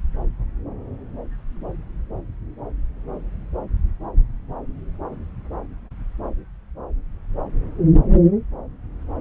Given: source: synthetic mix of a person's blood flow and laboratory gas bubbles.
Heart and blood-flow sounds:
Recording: Doppler ultrasound of blood flow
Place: subclavian vein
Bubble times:
no bubbles
From the record:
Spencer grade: 0 (complete lack of bubble signals)

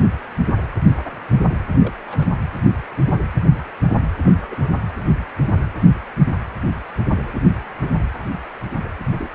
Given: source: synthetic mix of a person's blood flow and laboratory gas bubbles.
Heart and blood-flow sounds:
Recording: Doppler ultrasound of blood flow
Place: precordium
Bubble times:
1.79-1.94 s: bubbles
2.08-2.31 s: bubbles
4.23-4.68 s: bubbles
8.84-8.93 s: bubbles
9.18-9.30 s: bubbles
From the record:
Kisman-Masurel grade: 121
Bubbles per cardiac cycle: 1 to 2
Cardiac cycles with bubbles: 10 to 50%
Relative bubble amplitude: barely perceptible (0.100 to 0.250)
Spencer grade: 2 (many but less than half of the cardiac periods contain bubble signals, singularly or in groups)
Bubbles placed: anywhere in the cardiac cycle

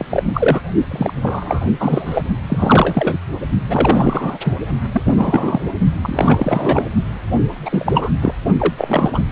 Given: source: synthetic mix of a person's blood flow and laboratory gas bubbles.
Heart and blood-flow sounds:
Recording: Doppler ultrasound of blood flow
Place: precordium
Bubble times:
0.00-0.05 s: bubbles
0.09-0.23 s: bubbles
0.33-0.61 s: bubbles
0.90-1.14 s: bubbles
1.23-1.69 s: bubbles
1.79-2.23 s: bubbles
2.46-3.18 s: bubbles
3.69-4.38 s: bubbles
4.45-4.57 s: bubbles
4.93-5.03 s: bubbles
5.05-5.69 s: bubbles
6.02-6.88 s: bubbles
7.51-8.11 s: bubbles
8.21-8.34 s: bubbles
8.59-8.73 s: bubbles
8.78-9.10 s: bubbles
9.12-9.23 s: bubbles
From the record:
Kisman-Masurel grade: 343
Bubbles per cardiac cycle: rolling drumbeat, 9 or more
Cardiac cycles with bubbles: 100%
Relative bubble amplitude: loud (0.450 to 0.775)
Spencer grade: 3 (all of the cardiac periods contain showers or single bubble signals, but not dominating or overriding the cardiac motion signals)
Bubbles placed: only in the low amplitude regions of the cardiac cycle

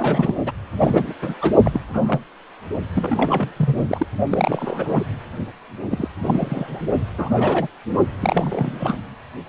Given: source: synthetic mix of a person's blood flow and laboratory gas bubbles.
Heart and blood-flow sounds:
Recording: Doppler ultrasound of blood flow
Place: precordium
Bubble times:
0.00-0.36 s: bubbles
0.45-0.51 s: bubbles
0.79-1.14 s: bubbles
1.22-1.34 s: bubbles
1.42-1.56 s: bubbles
1.64-1.81 s: bubbles
1.94-2.20 s: bubbles
2.94-3.52 s: bubbles
3.56-3.83 s: bubbles
3.89-4.06 s: bubbles
4.31-5.04 s: bubbles
5.91-6.08 s: bubbles
6.22-6.82 s: bubbles
7.18-7.68 s: bubbles
8.20-8.97 s: bubbles
From the record:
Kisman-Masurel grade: 242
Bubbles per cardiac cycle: several, 3 to 8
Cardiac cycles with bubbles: 100%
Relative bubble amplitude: moderate (0.250 to 0.450)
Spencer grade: 3 (all of the cardiac periods contain showers or single bubble signals, but not dominating or overriding the cardiac motion signals)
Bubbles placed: only in the low amplitude regions of the cardiac cycle

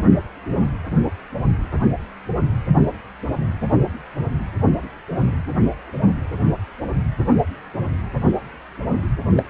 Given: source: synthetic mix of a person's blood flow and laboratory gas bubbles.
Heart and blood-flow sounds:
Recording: Doppler ultrasound of blood flow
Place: precordium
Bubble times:
9.37-9.43 s: bubbles
From the record:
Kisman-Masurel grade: 212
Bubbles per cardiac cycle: several, 3 to 8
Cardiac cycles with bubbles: 1 to 10%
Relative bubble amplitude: moderate (0.250 to 0.450)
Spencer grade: 1 (occasional bubble signal discernible with the cardiac motion signal, with majority of cardiac periods free of bubbles)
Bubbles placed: only in the low amplitude regions of the cardiac cycle

